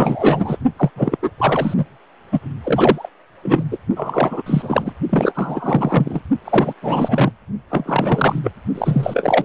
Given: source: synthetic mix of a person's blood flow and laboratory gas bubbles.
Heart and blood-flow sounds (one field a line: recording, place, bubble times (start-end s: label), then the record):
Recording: Doppler ultrasound of blood flow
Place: precordium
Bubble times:
0.00-0.57 s: bubbles
0.77-0.91 s: bubbles
0.96-1.17 s: bubbles
1.22-1.30 s: bubbles
1.38-1.74 s: bubbles
1.77-1.84 s: bubbles
2.32-2.40 s: bubbles
2.63-3.09 s: bubbles
3.43-3.63 s: bubbles
3.71-3.77 s: bubbles
3.96-4.42 s: bubbles
4.46-4.92 s: bubbles
5.09-6.21 s: bubbles
6.44-6.73 s: bubbles
6.82-7.31 s: bubbles
7.70-8.39 s: bubbles
8.44-8.51 s: bubbles
8.74-9.45 s: bubbles
From the record:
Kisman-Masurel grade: 343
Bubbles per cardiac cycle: rolling drumbeat, 9 or more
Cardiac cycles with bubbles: 100%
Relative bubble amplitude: loud (0.450 to 0.775)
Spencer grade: 3 (all of the cardiac periods contain showers or single bubble signals, but not dominating or overriding the cardiac motion signals)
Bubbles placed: only in the low amplitude regions of the cardiac cycle